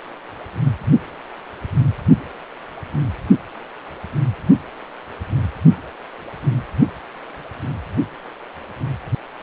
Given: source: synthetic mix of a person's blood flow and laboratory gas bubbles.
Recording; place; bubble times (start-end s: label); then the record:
Doppler ultrasound of blood flow; precordium
no bubbles
From the record:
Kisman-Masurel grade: 000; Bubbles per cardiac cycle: 0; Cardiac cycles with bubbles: 0%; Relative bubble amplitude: no bubbles discernible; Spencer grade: 0 (complete lack of bubble signals)